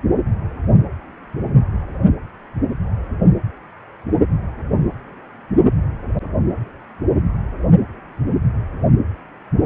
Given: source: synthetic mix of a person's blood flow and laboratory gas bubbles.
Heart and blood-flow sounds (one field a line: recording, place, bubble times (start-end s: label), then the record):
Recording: Doppler ultrasound of blood flow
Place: precordium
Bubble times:
no bubbles
From the record:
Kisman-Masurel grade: 000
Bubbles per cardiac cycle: 0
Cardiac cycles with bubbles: 0%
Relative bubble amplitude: no bubbles discernible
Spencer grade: 0 (complete lack of bubble signals)